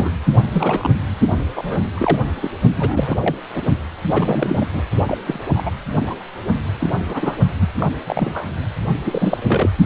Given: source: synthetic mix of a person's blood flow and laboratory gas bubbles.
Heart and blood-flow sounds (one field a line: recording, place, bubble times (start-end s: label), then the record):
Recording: Doppler ultrasound of blood flow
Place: precordium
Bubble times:
0.00-0.11 s: bubbles
0.53-0.91 s: bubbles
1.55-1.89 s: bubbles
1.95-2.17 s: bubbles
2.42-2.50 s: bubbles
2.77-3.17 s: bubbles
3.21-3.35 s: bubbles
3.54-3.61 s: bubbles
4.13-4.67 s: bubbles
4.73-4.82 s: bubbles
5.07-5.18 s: bubbles
5.27-5.40 s: bubbles
5.55-5.71 s: bubbles
6.07-6.16 s: bubbles
6.80-6.90 s: bubbles
7.06-7.36 s: bubbles
7.60-7.69 s: bubbles
7.79-7.87 s: bubbles
8.06-8.50 s: bubbles
9.04-9.70 s: bubbles
From the record:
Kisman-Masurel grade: 242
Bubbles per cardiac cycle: several, 3 to 8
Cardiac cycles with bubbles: 100%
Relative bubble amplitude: moderate (0.250 to 0.450)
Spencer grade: 3 (all of the cardiac periods contain showers or single bubble signals, but not dominating or overriding the cardiac motion signals)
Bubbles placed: only in the low amplitude regions of the cardiac cycle